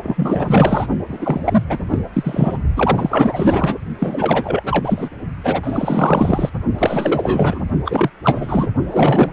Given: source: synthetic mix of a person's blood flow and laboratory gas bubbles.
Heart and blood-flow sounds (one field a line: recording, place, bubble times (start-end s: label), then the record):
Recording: Doppler ultrasound of blood flow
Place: precordium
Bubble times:
0.03-0.87 s: bubbles
1.08-1.62 s: bubbles
1.69-1.78 s: bubbles
1.89-1.99 s: bubbles
2.13-2.57 s: bubbles
2.75-3.76 s: bubbles
3.99-4.63 s: bubbles
4.66-5.09 s: bubbles
5.43-6.50 s: bubbles
6.78-7.62 s: bubbles
7.85-8.10 s: bubbles
8.23-8.68 s: bubbles
8.90-9.33 s: bubbles
From the record:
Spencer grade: 4 (maximum detectable bubble signal sounding continuously throughout systole and diastole of every cardiac period, and overriding the amplitude of the normal cardiac signals)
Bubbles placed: only in the low amplitude regions of the cardiac cycle